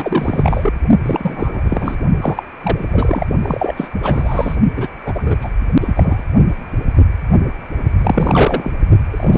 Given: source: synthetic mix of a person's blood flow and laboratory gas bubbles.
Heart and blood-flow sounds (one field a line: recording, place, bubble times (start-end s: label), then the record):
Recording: Doppler ultrasound of blood flow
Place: precordium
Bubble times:
0.00-0.73 s: bubbles
1.03-1.96 s: bubbles
2.21-2.44 s: bubbles
2.63-3.25 s: bubbles
3.42-3.74 s: bubbles
3.77-3.90 s: bubbles
4.02-4.56 s: bubbles
4.75-4.88 s: bubbles
5.04-5.37 s: bubbles
5.41-5.49 s: bubbles
5.81-6.22 s: bubbles
7.97-8.72 s: bubbles
9.10-9.38 s: bubbles
From the record:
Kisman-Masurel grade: 333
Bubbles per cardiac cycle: rolling drumbeat, 9 or more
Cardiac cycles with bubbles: 50 to 99%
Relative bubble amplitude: loud (0.450 to 0.775)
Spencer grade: 3 (all of the cardiac periods contain showers or single bubble signals, but not dominating or overriding the cardiac motion signals)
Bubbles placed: only in the low amplitude regions of the cardiac cycle